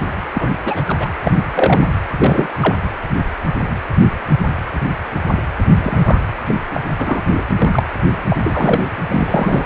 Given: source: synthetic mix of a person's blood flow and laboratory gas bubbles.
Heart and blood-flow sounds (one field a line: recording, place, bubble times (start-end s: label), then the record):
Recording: Doppler ultrasound of blood flow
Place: precordium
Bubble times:
0.33-0.49 s: bubbles
0.65-0.82 s: bubbles
0.87-1.09 s: bubbles
1.24-1.31 s: bubbles
1.55-1.95 s: bubbles
2.19-2.49 s: bubbles
2.61-2.76 s: bubbles
5.75-6.19 s: bubbles
6.46-6.61 s: bubbles
6.73-6.80 s: bubbles
6.98-7.23 s: bubbles
7.33-7.42 s: bubbles
7.58-7.83 s: bubbles
8.30-8.37 s: bubbles
8.45-8.87 s: bubbles
9.08-9.65 s: bubbles
From the record:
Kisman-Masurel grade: 232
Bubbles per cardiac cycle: several, 3 to 8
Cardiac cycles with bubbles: 50 to 99%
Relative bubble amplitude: moderate (0.250 to 0.450)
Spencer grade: 3 (all of the cardiac periods contain showers or single bubble signals, but not dominating or overriding the cardiac motion signals)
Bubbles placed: anywhere in the cardiac cycle